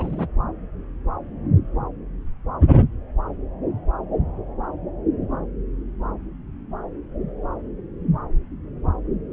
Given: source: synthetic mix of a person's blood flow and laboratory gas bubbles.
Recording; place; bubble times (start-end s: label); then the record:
Doppler ultrasound of blood flow; subclavian vein
0.00-0.28 s: bubbles
From the record:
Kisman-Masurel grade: 122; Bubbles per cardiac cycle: 1 to 2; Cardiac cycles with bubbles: 10 to 50%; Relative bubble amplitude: moderate (0.250 to 0.450); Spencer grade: 2 (many but less than half of the cardiac periods contain bubble signals, singularly or in groups); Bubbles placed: anywhere in the cardiac cycle